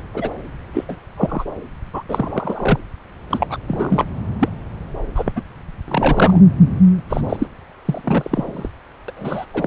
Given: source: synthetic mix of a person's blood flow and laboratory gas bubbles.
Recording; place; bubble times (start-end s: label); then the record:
Doppler ultrasound of blood flow; subclavian vein
0.14-0.30 s: bubbles
0.73-0.84 s: bubbles
0.89-0.96 s: bubbles
1.17-1.45 s: bubbles
1.93-2.02 s: bubbles
2.08-2.79 s: bubbles
3.31-3.57 s: bubbles
3.67-4.05 s: bubbles
4.39-4.49 s: bubbles
5.15-5.33 s: bubbles
5.36-5.41 s: bubbles
5.88-6.41 s: bubbles
7.09-7.21 s: bubbles
7.29-7.46 s: bubbles
7.85-8.02 s: bubbles
8.04-8.70 s: bubbles
9.08-9.11 s: bubbles
9.16-9.46 s: bubbles
9.54-9.67 s: bubbles
From the record:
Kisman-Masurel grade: 242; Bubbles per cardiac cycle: several, 3 to 8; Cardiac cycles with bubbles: 100%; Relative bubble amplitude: moderate (0.250 to 0.450); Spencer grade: 3 (all of the cardiac periods contain showers or single bubble signals, but not dominating or overriding the cardiac motion signals); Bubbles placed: anywhere in the cardiac cycle